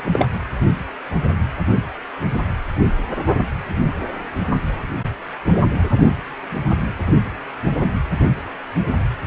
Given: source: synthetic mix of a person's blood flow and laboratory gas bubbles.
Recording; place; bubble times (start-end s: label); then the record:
Doppler ultrasound of blood flow; precordium
0.00-0.34 s: bubbles
From the record:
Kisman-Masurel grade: 113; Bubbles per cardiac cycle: 1 to 2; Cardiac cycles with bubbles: 1 to 10%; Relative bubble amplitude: loud (0.450 to 0.775); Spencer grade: 1 (occasional bubble signal discernible with the cardiac motion signal, with majority of cardiac periods free of bubbles); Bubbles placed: anywhere in the cardiac cycle